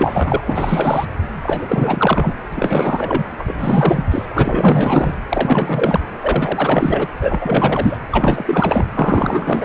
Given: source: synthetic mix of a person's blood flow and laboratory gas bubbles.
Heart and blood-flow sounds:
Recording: Doppler ultrasound of blood flow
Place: precordium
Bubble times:
0.00-0.40 s: bubbles
0.47-1.06 s: bubbles
1.43-2.33 s: bubbles
2.53-3.25 s: bubbles
3.39-4.04 s: bubbles
4.11-4.25 s: bubbles
4.29-5.15 s: bubbles
5.30-6.00 s: bubbles
6.21-7.07 s: bubbles
7.21-7.97 s: bubbles
8.11-8.86 s: bubbles
8.94-9.65 s: bubbles
From the record:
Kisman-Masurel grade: 444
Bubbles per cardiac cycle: continuous sound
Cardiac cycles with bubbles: 100%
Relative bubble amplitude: maximal (0.775 to 0.999)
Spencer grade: 4 (maximum detectable bubble signal sounding continuously throughout systole and diastole of every cardiac period, and overriding the amplitude of the normal cardiac signals)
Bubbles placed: anywhere in the cardiac cycle

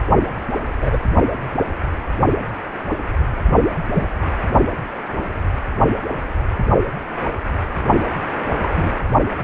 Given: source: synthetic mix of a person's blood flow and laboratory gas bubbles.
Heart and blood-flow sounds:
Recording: Doppler ultrasound of blood flow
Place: precordium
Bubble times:
0.53-1.00 s: bubbles
3.94-4.04 s: bubbles
8.62-8.69 s: bubbles
8.75-8.92 s: bubbles
From the record:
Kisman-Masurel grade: 122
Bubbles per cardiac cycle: 1 to 2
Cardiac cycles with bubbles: 10 to 50%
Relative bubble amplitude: moderate (0.250 to 0.450)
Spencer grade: 2 (many but less than half of the cardiac periods contain bubble signals, singularly or in groups)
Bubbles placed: only in the low amplitude regions of the cardiac cycle

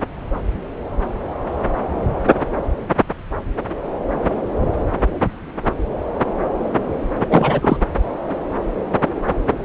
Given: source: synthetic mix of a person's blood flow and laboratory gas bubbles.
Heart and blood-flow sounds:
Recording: Doppler ultrasound of blood flow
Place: subclavian vein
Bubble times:
7.29-7.77 s: bubbles
From the record:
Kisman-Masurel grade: 213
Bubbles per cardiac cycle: several, 3 to 8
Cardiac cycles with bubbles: 1 to 10%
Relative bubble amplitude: loud (0.450 to 0.775)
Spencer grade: 1 (occasional bubble signal discernible with the cardiac motion signal, with majority of cardiac periods free of bubbles)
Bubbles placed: anywhere in the cardiac cycle

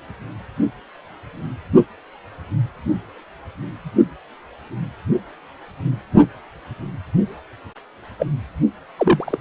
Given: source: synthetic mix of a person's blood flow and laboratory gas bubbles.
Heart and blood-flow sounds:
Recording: Doppler ultrasound of blood flow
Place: precordium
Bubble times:
8.19-8.25 s: bubbles
8.98-9.38 s: bubbles
From the record:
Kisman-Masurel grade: 123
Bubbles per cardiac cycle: 1 to 2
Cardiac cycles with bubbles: 10 to 50%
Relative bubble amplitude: loud (0.450 to 0.775)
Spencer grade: 2 (many but less than half of the cardiac periods contain bubble signals, singularly or in groups)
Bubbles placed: only in the low amplitude regions of the cardiac cycle

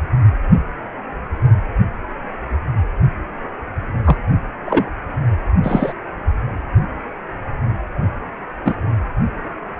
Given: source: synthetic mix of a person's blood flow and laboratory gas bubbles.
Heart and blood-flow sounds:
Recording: Doppler ultrasound of blood flow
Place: precordium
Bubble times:
4.04-4.17 s: bubbles
4.64-4.89 s: bubbles
5.63-5.93 s: bubbles
8.64-8.75 s: bubbles
From the record:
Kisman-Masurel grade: 123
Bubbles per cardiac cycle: 1 to 2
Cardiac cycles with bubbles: 10 to 50%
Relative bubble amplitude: loud (0.450 to 0.775)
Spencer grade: 2 (many but less than half of the cardiac periods contain bubble signals, singularly or in groups)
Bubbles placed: anywhere in the cardiac cycle

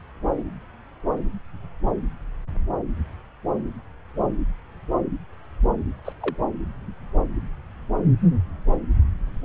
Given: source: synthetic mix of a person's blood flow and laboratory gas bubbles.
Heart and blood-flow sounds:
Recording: Doppler ultrasound of blood flow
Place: subclavian vein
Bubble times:
6.04-6.12 s: bubbles
6.21-6.36 s: bubbles
From the record:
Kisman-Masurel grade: 111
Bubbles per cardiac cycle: 1 to 2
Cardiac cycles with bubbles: 1 to 10%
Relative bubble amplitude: barely perceptible (0.100 to 0.250)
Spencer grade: 1 (occasional bubble signal discernible with the cardiac motion signal, with majority of cardiac periods free of bubbles)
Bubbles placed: anywhere in the cardiac cycle

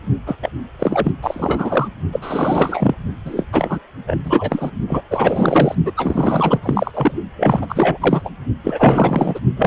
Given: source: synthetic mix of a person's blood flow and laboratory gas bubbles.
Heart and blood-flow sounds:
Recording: Doppler ultrasound of blood flow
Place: precordium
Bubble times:
0.26-0.36 s: bubbles
0.42-0.50 s: bubbles
0.78-1.11 s: bubbles
1.22-1.88 s: bubbles
2.12-2.95 s: bubbles
3.25-3.46 s: bubbles
3.52-3.80 s: bubbles
4.07-4.17 s: bubbles
4.24-4.71 s: bubbles
4.86-5.02 s: bubbles
5.10-5.75 s: bubbles
5.84-5.92 s: bubbles
5.96-6.91 s: bubbles
6.93-7.15 s: bubbles
7.36-8.29 s: bubbles
8.63-9.39 s: bubbles
9.56-9.67 s: bubbles
From the record:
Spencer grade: 4 (maximum detectable bubble signal sounding continuously throughout systole and diastole of every cardiac period, and overriding the amplitude of the normal cardiac signals)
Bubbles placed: only in the low amplitude regions of the cardiac cycle

